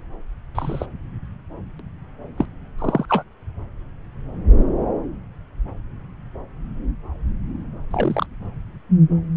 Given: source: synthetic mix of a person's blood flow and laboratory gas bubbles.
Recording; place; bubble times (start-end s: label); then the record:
Doppler ultrasound of blood flow; subclavian vein
0.55-0.86 s: bubbles
1.79-1.81 s: bubbles
2.38-2.46 s: bubbles
2.79-3.06 s: bubbles
3.09-3.23 s: bubbles
7.91-8.26 s: bubbles
From the record:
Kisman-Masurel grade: 122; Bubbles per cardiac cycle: 1 to 2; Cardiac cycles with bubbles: 10 to 50%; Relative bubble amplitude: moderate (0.250 to 0.450); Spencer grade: 2 (many but less than half of the cardiac periods contain bubble signals, singularly or in groups); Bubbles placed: anywhere in the cardiac cycle